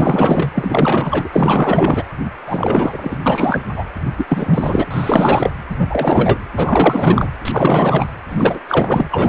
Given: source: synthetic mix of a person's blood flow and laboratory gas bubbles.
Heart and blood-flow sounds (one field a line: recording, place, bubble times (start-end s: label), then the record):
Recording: Doppler ultrasound of blood flow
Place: precordium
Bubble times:
0.00-0.51 s: bubbles
0.55-1.29 s: bubbles
1.32-2.04 s: bubbles
2.46-3.17 s: bubbles
3.26-3.62 s: bubbles
3.76-3.85 s: bubbles
4.17-4.87 s: bubbles
4.90-5.51 s: bubbles
5.69-5.76 s: bubbles
5.79-6.38 s: bubbles
6.55-7.29 s: bubbles
7.45-8.05 s: bubbles
8.29-8.60 s: bubbles
8.68-9.29 s: bubbles
From the record:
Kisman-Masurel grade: 444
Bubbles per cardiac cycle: continuous sound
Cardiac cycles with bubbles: 100%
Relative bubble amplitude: maximal (0.775 to 0.999)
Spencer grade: 4 (maximum detectable bubble signal sounding continuously throughout systole and diastole of every cardiac period, and overriding the amplitude of the normal cardiac signals)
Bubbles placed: anywhere in the cardiac cycle